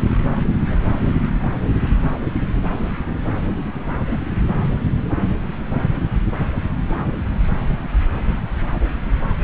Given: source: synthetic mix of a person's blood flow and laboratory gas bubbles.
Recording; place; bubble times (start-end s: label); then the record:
Doppler ultrasound of blood flow; subclavian vein
0.29-0.38 s: bubbles
0.70-0.90 s: bubbles
4.11-4.21 s: bubbles
6.87-7.10 s: bubbles
From the record:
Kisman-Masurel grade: 121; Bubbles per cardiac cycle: 1 to 2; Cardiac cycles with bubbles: 10 to 50%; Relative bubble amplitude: barely perceptible (0.100 to 0.250); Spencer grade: 2 (many but less than half of the cardiac periods contain bubble signals, singularly or in groups); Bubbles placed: anywhere in the cardiac cycle